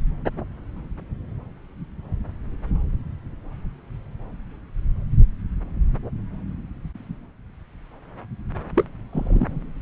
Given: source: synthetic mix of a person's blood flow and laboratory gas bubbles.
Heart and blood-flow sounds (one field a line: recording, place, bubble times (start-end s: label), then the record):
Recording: Doppler ultrasound of blood flow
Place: subclavian vein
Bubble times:
8.75-8.84 s: bubbles
9.12-9.60 s: bubbles
From the record:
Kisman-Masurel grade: 112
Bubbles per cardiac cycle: 1 to 2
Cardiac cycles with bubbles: 1 to 10%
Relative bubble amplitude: moderate (0.250 to 0.450)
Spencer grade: 1 (occasional bubble signal discernible with the cardiac motion signal, with majority of cardiac periods free of bubbles)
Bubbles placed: anywhere in the cardiac cycle